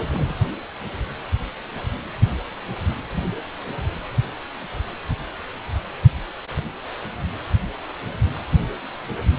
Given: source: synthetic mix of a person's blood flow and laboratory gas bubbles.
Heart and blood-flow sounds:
Doppler ultrasound of blood flow; precordium
0.10-0.34 s: bubbles
From the record:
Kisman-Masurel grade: 211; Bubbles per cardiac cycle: several, 3 to 8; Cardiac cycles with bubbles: 1 to 10%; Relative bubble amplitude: barely perceptible (0.100 to 0.250); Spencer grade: 1 (occasional bubble signal discernible with the cardiac motion signal, with majority of cardiac periods free of bubbles); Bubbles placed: anywhere in the cardiac cycle

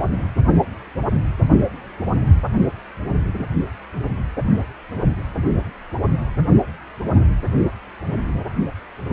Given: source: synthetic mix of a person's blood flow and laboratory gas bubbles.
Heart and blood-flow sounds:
Doppler ultrasound of blood flow; precordium
no bubbles
From the record:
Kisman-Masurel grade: 000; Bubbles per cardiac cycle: 0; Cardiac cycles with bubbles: 0%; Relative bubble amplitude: no bubbles discernible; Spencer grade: 0 (complete lack of bubble signals)

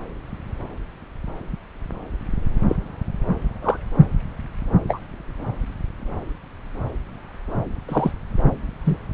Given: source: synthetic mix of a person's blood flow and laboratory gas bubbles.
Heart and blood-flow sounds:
Doppler ultrasound of blood flow; subclavian vein
2.69-2.75 s: bubbles
3.62-3.77 s: bubbles
4.88-5.00 s: bubbles
7.88-8.11 s: bubbles
8.86-8.97 s: bubbles
From the record:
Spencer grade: 2 (many but less than half of the cardiac periods contain bubble signals, singularly or in groups); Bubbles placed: anywhere in the cardiac cycle

